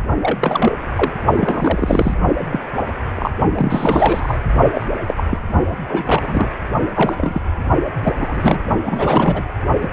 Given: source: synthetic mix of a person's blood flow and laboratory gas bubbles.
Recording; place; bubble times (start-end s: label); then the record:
Doppler ultrasound of blood flow; precordium
0.22-0.38 s: bubbles
0.41-0.76 s: bubbles
0.95-1.12 s: bubbles
1.34-2.15 s: bubbles
2.52-2.60 s: bubbles
3.16-3.31 s: bubbles
3.54-4.38 s: bubbles
4.75-4.86 s: bubbles
5.08-5.14 s: bubbles
5.17-5.24 s: bubbles
5.30-5.38 s: bubbles
5.89-6.51 s: bubbles
6.94-7.15 s: bubbles
7.18-7.40 s: bubbles
8.04-8.13 s: bubbles
8.16-8.59 s: bubbles
8.85-9.45 s: bubbles
9.81-9.89 s: bubbles
From the record:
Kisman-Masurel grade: 242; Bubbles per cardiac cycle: several, 3 to 8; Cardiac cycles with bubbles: 100%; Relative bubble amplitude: moderate (0.250 to 0.450); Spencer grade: 3 (all of the cardiac periods contain showers or single bubble signals, but not dominating or overriding the cardiac motion signals); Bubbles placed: only in the low amplitude regions of the cardiac cycle